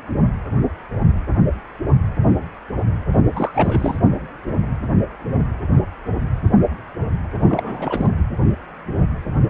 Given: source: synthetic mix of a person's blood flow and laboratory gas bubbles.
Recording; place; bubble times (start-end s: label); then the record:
Doppler ultrasound of blood flow; precordium
3.35-3.96 s: bubbles
7.47-8.06 s: bubbles
From the record:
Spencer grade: 2 (many but less than half of the cardiac periods contain bubble signals, singularly or in groups); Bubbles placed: only in the low amplitude regions of the cardiac cycle